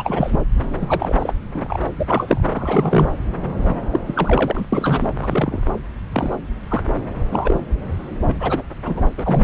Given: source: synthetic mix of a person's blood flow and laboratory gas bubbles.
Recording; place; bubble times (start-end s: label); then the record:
Doppler ultrasound of blood flow; subclavian vein
0.00-0.43 s: bubbles
0.79-1.33 s: bubbles
1.54-1.79 s: bubbles
1.98-2.43 s: bubbles
2.51-3.08 s: bubbles
3.63-3.84 s: bubbles
3.92-3.99 s: bubbles
4.07-4.65 s: bubbles
4.72-5.08 s: bubbles
5.22-5.61 s: bubbles
6.13-6.37 s: bubbles
6.69-6.82 s: bubbles
7.31-7.60 s: bubbles
8.28-8.34 s: bubbles
8.39-8.63 s: bubbles
8.84-9.00 s: bubbles
9.17-9.44 s: bubbles
From the record:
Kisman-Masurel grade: 242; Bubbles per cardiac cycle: several, 3 to 8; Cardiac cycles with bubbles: 100%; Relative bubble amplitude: moderate (0.250 to 0.450); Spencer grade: 3 (all of the cardiac periods contain showers or single bubble signals, but not dominating or overriding the cardiac motion signals); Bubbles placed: anywhere in the cardiac cycle